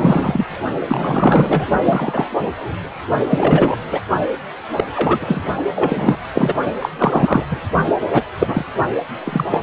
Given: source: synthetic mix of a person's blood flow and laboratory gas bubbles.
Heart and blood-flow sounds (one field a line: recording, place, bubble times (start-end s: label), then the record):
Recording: Doppler ultrasound of blood flow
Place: precordium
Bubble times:
0.00-0.45 s: bubbles
0.88-1.66 s: bubbles
1.85-2.27 s: bubbles
3.30-3.76 s: bubbles
3.91-4.01 s: bubbles
4.76-4.84 s: bubbles
4.96-5.42 s: bubbles
5.75-6.17 s: bubbles
6.32-6.53 s: bubbles
6.79-6.89 s: bubbles
6.98-7.44 s: bubbles
7.50-7.61 s: bubbles
8.12-8.22 s: bubbles
8.38-8.65 s: bubbles
9.24-9.45 s: bubbles
9.51-9.63 s: bubbles
From the record:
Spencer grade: 3 (all of the cardiac periods contain showers or single bubble signals, but not dominating or overriding the cardiac motion signals)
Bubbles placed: only in the low amplitude regions of the cardiac cycle